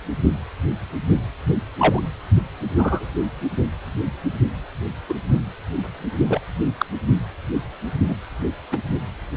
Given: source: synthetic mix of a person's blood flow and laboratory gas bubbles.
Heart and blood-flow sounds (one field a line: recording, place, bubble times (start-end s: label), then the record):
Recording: Doppler ultrasound of blood flow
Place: precordium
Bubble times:
1.79-2.01 s: bubbles
2.77-3.06 s: bubbles
5.09-5.14 s: bubbles
6.29-6.41 s: bubbles
6.78-6.86 s: bubbles
8.08-8.15 s: bubbles
8.71-8.77 s: bubbles
From the record:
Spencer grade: 2 (many but less than half of the cardiac periods contain bubble signals, singularly or in groups)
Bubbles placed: only in the low amplitude regions of the cardiac cycle